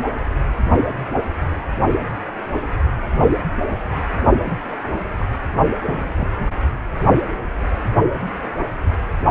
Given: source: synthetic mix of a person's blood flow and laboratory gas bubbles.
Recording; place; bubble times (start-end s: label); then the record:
Doppler ultrasound of blood flow; precordium
4.45-4.77 s: bubbles
5.18-5.25 s: bubbles
5.86-6.12 s: bubbles
6.17-6.33 s: bubbles
From the record:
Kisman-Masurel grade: 121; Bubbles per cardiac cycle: 1 to 2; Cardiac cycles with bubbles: 10 to 50%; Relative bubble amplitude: barely perceptible (0.100 to 0.250); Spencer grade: 2 (many but less than half of the cardiac periods contain bubble signals, singularly or in groups); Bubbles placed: only in the low amplitude regions of the cardiac cycle